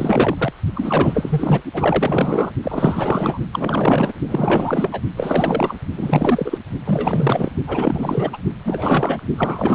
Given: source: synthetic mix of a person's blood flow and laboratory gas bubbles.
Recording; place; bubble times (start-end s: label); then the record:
Doppler ultrasound of blood flow; precordium
0.00-0.52 s: bubbles
0.74-1.61 s: bubbles
1.74-2.52 s: bubbles
2.62-3.39 s: bubbles
3.52-4.12 s: bubbles
4.28-5.01 s: bubbles
5.17-5.76 s: bubbles
5.96-6.58 s: bubbles
6.85-7.53 s: bubbles
7.67-8.38 s: bubbles
8.65-9.20 s: bubbles
9.37-9.75 s: bubbles
From the record:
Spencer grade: 4 (maximum detectable bubble signal sounding continuously throughout systole and diastole of every cardiac period, and overriding the amplitude of the normal cardiac signals); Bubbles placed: only in the low amplitude regions of the cardiac cycle